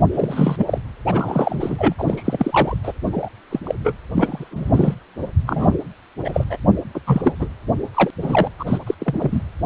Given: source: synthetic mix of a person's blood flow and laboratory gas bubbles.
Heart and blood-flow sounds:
Doppler ultrasound of blood flow; precordium
0.13-0.78 s: bubbles
1.06-1.94 s: bubbles
1.98-2.77 s: bubbles
2.83-2.92 s: bubbles
3.12-3.29 s: bubbles
3.51-3.60 s: bubbles
3.63-3.75 s: bubbles
3.84-3.93 s: bubbles
4.14-4.48 s: bubbles
4.51-4.95 s: bubbles
5.46-5.78 s: bubbles
6.24-6.44 s: bubbles
6.50-6.57 s: bubbles
6.94-7.00 s: bubbles
7.07-7.34 s: bubbles
7.39-7.48 s: bubbles
7.95-8.11 s: bubbles
8.21-8.49 s: bubbles
8.59-8.78 s: bubbles
8.87-8.95 s: bubbles
8.99-9.42 s: bubbles
From the record:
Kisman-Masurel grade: 242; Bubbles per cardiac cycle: several, 3 to 8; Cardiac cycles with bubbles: 100%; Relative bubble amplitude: moderate (0.250 to 0.450); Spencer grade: 3 (all of the cardiac periods contain showers or single bubble signals, but not dominating or overriding the cardiac motion signals); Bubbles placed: anywhere in the cardiac cycle

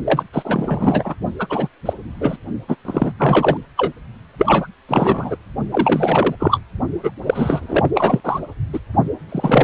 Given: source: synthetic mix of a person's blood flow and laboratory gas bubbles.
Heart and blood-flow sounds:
Doppler ultrasound of blood flow; precordium
0.05-0.23 s: bubbles
0.33-1.15 s: bubbles
1.39-1.47 s: bubbles
1.50-1.69 s: bubbles
1.86-1.93 s: bubbles
2.20-2.36 s: bubbles
2.68-2.75 s: bubbles
2.85-3.11 s: bubbles
3.19-3.57 s: bubbles
3.76-3.93 s: bubbles
4.38-4.67 s: bubbles
4.89-5.37 s: bubbles
5.71-6.36 s: bubbles
6.39-6.61 s: bubbles
7.03-7.11 s: bubbles
7.26-7.88 s: bubbles
7.95-8.21 s: bubbles
8.23-8.39 s: bubbles
8.73-8.79 s: bubbles
9.29-9.64 s: bubbles
From the record:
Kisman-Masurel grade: 343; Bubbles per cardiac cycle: rolling drumbeat, 9 or more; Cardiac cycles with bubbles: 100%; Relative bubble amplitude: loud (0.450 to 0.775); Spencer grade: 3 (all of the cardiac periods contain showers or single bubble signals, but not dominating or overriding the cardiac motion signals); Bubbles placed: only in the low amplitude regions of the cardiac cycle

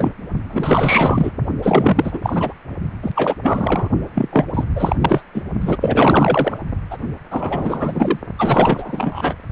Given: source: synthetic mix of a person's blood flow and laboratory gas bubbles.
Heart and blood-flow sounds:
Doppler ultrasound of blood flow; precordium
0.00-0.13 s: bubbles
0.49-1.33 s: bubbles
1.62-2.53 s: bubbles
3.02-3.11 s: bubbles
3.16-3.35 s: bubbles
3.43-3.88 s: bubbles
4.15-4.29 s: bubbles
4.32-4.46 s: bubbles
4.53-4.64 s: bubbles
4.75-4.96 s: bubbles
5.00-5.24 s: bubbles
5.34-5.42 s: bubbles
5.60-5.78 s: bubbles
5.80-6.58 s: bubbles
6.90-6.97 s: bubbles
7.30-8.19 s: bubbles
8.38-9.34 s: bubbles
From the record:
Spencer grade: 4 (maximum detectable bubble signal sounding continuously throughout systole and diastole of every cardiac period, and overriding the amplitude of the normal cardiac signals); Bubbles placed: only in the low amplitude regions of the cardiac cycle

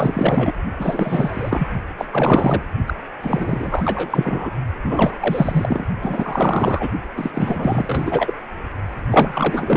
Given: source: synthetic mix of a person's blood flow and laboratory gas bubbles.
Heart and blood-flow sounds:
Doppler ultrasound of blood flow; precordium
0.00-0.53 s: bubbles
0.80-1.68 s: bubbles
1.98-2.05 s: bubbles
2.12-2.62 s: bubbles
2.87-2.96 s: bubbles
3.21-4.51 s: bubbles
4.83-5.87 s: bubbles
6.01-6.88 s: bubbles
7.17-7.30 s: bubbles
7.33-8.34 s: bubbles
9.10-9.77 s: bubbles
From the record:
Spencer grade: 4 (maximum detectable bubble signal sounding continuously throughout systole and diastole of every cardiac period, and overriding the amplitude of the normal cardiac signals); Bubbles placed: only in the low amplitude regions of the cardiac cycle

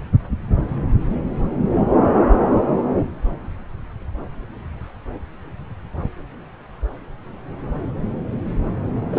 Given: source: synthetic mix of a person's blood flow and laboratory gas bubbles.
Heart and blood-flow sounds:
Doppler ultrasound of blood flow; subclavian vein
9.12-9.19 s: bubbles
From the record:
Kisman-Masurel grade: 212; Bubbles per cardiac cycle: several, 3 to 8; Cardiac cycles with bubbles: 1 to 10%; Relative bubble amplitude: moderate (0.250 to 0.450); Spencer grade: 1 (occasional bubble signal discernible with the cardiac motion signal, with majority of cardiac periods free of bubbles); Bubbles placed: anywhere in the cardiac cycle

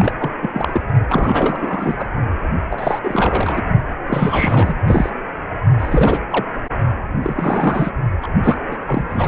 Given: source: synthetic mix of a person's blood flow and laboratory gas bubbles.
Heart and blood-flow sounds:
Doppler ultrasound of blood flow; precordium
0.00-0.12 s: bubbles
0.20-0.30 s: bubbles
0.41-0.49 s: bubbles
0.53-0.81 s: bubbles
1.08-2.09 s: bubbles
2.70-2.99 s: bubbles
3.03-3.63 s: bubbles
4.06-4.75 s: bubbles
4.86-5.09 s: bubbles
5.79-6.20 s: bubbles
6.30-6.45 s: bubbles
7.22-7.91 s: bubbles
8.22-8.27 s: bubbles
8.43-8.57 s: bubbles
8.71-8.77 s: bubbles
8.87-9.04 s: bubbles
9.09-9.28 s: bubbles
From the record:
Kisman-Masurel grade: 342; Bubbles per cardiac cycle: rolling drumbeat, 9 or more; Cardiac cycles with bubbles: 100%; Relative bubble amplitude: moderate (0.250 to 0.450); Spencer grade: 3 (all of the cardiac periods contain showers or single bubble signals, but not dominating or overriding the cardiac motion signals); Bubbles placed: only in the low amplitude regions of the cardiac cycle

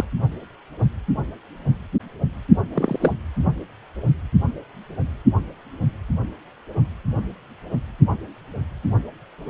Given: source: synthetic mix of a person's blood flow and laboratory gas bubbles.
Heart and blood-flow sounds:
Doppler ultrasound of blood flow; precordium
0.00-0.04 s: bubbles
2.73-3.13 s: bubbles
From the record:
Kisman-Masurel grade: 122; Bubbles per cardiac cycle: 1 to 2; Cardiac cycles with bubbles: 10 to 50%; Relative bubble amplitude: moderate (0.250 to 0.450); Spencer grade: 2 (many but less than half of the cardiac periods contain bubble signals, singularly or in groups); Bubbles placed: anywhere in the cardiac cycle

